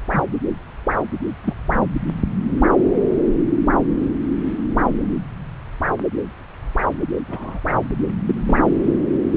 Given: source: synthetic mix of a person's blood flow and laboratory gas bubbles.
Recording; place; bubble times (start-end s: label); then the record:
Doppler ultrasound of blood flow; subclavian vein
0.12-0.23 s: bubbles
1.44-1.54 s: bubbles
7.28-7.59 s: bubbles
8.26-8.70 s: bubbles
From the record:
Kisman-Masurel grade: 122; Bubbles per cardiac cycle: 1 to 2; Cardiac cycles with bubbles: 10 to 50%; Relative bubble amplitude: moderate (0.250 to 0.450); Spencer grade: 2 (many but less than half of the cardiac periods contain bubble signals, singularly or in groups); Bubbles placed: anywhere in the cardiac cycle